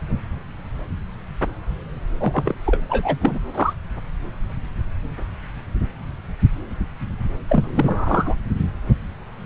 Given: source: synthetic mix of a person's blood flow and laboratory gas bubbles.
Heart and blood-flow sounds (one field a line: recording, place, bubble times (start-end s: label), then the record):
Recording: Doppler ultrasound of blood flow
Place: subclavian vein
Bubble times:
2.20-2.58 s: bubbles
2.66-2.78 s: bubbles
2.89-3.18 s: bubbles
3.21-3.38 s: bubbles
3.54-3.73 s: bubbles
7.48-8.36 s: bubbles
9.38-9.46 s: bubbles
From the record:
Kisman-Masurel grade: 222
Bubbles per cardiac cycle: several, 3 to 8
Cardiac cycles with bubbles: 10 to 50%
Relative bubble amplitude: moderate (0.250 to 0.450)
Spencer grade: 2 (many but less than half of the cardiac periods contain bubble signals, singularly or in groups)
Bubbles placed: anywhere in the cardiac cycle